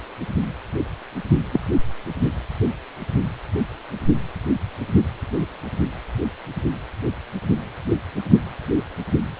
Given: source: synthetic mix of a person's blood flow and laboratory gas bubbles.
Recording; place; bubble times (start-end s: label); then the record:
Doppler ultrasound of blood flow; precordium
1.52-1.60 s: bubbles
From the record:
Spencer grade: 2 (many but less than half of the cardiac periods contain bubble signals, singularly or in groups); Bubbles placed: only in the low amplitude regions of the cardiac cycle